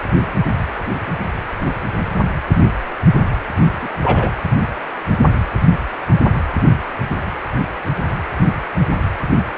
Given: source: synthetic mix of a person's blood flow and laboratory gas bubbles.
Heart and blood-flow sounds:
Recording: Doppler ultrasound of blood flow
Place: precordium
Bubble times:
3.81-3.89 s: bubbles
4.02-4.32 s: bubbles
From the record:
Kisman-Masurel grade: 223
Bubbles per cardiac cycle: several, 3 to 8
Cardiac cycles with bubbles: 10 to 50%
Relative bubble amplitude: loud (0.450 to 0.775)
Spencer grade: 2 (many but less than half of the cardiac periods contain bubble signals, singularly or in groups)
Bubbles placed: only in the low amplitude regions of the cardiac cycle

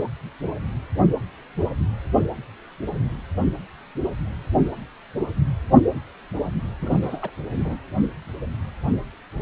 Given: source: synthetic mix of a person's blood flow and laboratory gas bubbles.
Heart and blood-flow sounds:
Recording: Doppler ultrasound of blood flow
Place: precordium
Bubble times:
6.81-7.30 s: bubbles
7.58-7.76 s: bubbles
From the record:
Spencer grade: 2 (many but less than half of the cardiac periods contain bubble signals, singularly or in groups)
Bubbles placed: anywhere in the cardiac cycle

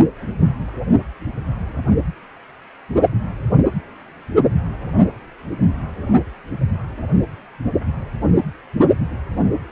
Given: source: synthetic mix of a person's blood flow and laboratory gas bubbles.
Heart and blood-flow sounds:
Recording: Doppler ultrasound of blood flow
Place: precordium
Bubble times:
no bubbles
From the record:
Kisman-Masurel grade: 000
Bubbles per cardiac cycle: 0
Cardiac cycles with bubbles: 0%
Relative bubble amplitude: no bubbles discernible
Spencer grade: 0 (complete lack of bubble signals)

